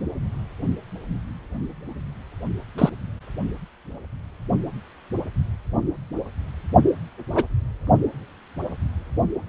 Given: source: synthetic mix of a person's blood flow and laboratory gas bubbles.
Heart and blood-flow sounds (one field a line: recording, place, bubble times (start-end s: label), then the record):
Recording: Doppler ultrasound of blood flow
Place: precordium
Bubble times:
2.78-2.90 s: bubbles
7.30-7.44 s: bubbles
From the record:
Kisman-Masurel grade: 123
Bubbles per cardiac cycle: 1 to 2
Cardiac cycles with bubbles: 10 to 50%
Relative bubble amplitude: loud (0.450 to 0.775)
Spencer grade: 2 (many but less than half of the cardiac periods contain bubble signals, singularly or in groups)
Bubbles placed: only in the low amplitude regions of the cardiac cycle